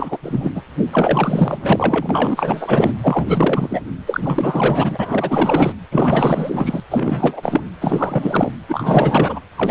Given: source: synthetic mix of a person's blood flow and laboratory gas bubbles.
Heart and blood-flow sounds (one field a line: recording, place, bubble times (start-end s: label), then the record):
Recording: Doppler ultrasound of blood flow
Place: precordium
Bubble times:
0.00-0.18 s: bubbles
0.23-0.52 s: bubbles
0.55-0.61 s: bubbles
0.91-2.92 s: bubbles
3.02-3.81 s: bubbles
4.06-5.73 s: bubbles
5.92-6.80 s: bubbles
6.90-7.61 s: bubbles
7.80-8.52 s: bubbles
8.68-9.39 s: bubbles
9.57-9.71 s: bubbles
From the record:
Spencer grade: 4 (maximum detectable bubble signal sounding continuously throughout systole and diastole of every cardiac period, and overriding the amplitude of the normal cardiac signals)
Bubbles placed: anywhere in the cardiac cycle